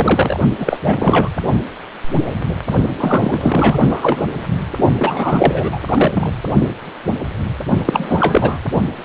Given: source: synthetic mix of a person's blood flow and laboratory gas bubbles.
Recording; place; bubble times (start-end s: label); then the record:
Doppler ultrasound of blood flow; precordium
0.00-0.38 s: bubbles
0.58-0.79 s: bubbles
0.84-1.29 s: bubbles
3.00-4.25 s: bubbles
4.99-5.80 s: bubbles
5.88-6.32 s: bubbles
7.85-8.58 s: bubbles
From the record:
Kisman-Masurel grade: 333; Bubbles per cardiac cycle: rolling drumbeat, 9 or more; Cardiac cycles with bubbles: 50 to 99%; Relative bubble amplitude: loud (0.450 to 0.775); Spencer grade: 3 (all of the cardiac periods contain showers or single bubble signals, but not dominating or overriding the cardiac motion signals); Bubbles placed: only in the low amplitude regions of the cardiac cycle